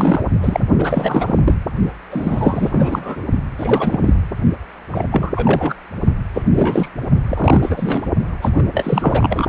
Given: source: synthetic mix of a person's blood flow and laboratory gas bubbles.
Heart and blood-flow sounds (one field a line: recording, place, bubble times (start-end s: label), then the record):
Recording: Doppler ultrasound of blood flow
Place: precordium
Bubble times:
0.00-0.24 s: bubbles
0.42-0.60 s: bubbles
0.78-1.38 s: bubbles
1.43-1.54 s: bubbles
2.10-3.28 s: bubbles
3.58-4.13 s: bubbles
4.92-5.05 s: bubbles
5.11-5.33 s: bubbles
5.35-5.75 s: bubbles
6.33-6.42 s: bubbles
6.46-6.88 s: bubbles
7.28-8.02 s: bubbles
8.41-8.49 s: bubbles
8.55-8.63 s: bubbles
8.73-9.46 s: bubbles
From the record:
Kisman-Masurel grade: 342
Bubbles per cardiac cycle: rolling drumbeat, 9 or more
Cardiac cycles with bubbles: 100%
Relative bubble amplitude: moderate (0.250 to 0.450)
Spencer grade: 3 (all of the cardiac periods contain showers or single bubble signals, but not dominating or overriding the cardiac motion signals)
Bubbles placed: only in the low amplitude regions of the cardiac cycle